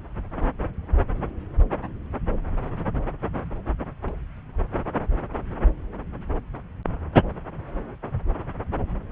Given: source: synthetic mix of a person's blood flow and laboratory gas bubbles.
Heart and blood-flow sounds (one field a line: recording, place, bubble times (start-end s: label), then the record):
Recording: Doppler ultrasound of blood flow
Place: subclavian vein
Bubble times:
4.04-4.14 s: bubbles
From the record:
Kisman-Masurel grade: 111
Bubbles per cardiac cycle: 1 to 2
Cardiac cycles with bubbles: 1 to 10%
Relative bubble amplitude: barely perceptible (0.100 to 0.250)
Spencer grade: 1 (occasional bubble signal discernible with the cardiac motion signal, with majority of cardiac periods free of bubbles)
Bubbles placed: anywhere in the cardiac cycle